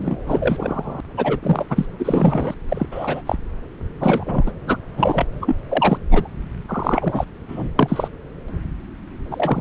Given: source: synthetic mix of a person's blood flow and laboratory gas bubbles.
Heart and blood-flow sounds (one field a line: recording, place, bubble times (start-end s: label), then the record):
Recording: Doppler ultrasound of blood flow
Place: subclavian vein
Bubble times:
0.00-0.17 s: bubbles
0.25-1.00 s: bubbles
1.17-1.40 s: bubbles
1.43-1.66 s: bubbles
1.70-1.85 s: bubbles
1.99-2.55 s: bubbles
2.69-2.86 s: bubbles
2.91-3.22 s: bubbles
3.26-3.35 s: bubbles
4.00-4.52 s: bubbles
4.67-4.77 s: bubbles
4.97-5.26 s: bubbles
5.42-5.55 s: bubbles
5.68-5.98 s: bubbles
6.10-6.29 s: bubbles
6.68-7.25 s: bubbles
7.48-7.69 s: bubbles
7.79-8.08 s: bubbles
9.30-9.61 s: bubbles
From the record:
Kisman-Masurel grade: 243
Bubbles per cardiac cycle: several, 3 to 8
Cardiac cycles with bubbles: 100%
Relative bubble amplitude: loud (0.450 to 0.775)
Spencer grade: 3 (all of the cardiac periods contain showers or single bubble signals, but not dominating or overriding the cardiac motion signals)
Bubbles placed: anywhere in the cardiac cycle